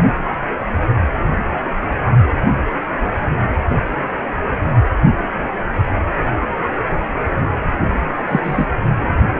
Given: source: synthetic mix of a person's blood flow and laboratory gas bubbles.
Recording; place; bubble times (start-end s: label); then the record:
Doppler ultrasound of blood flow; precordium
8.28-8.40 s: bubbles
8.43-8.66 s: bubbles
From the record:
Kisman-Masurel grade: 123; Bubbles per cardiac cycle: 1 to 2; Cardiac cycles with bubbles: 10 to 50%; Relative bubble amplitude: loud (0.450 to 0.775); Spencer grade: 2 (many but less than half of the cardiac periods contain bubble signals, singularly or in groups); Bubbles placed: anywhere in the cardiac cycle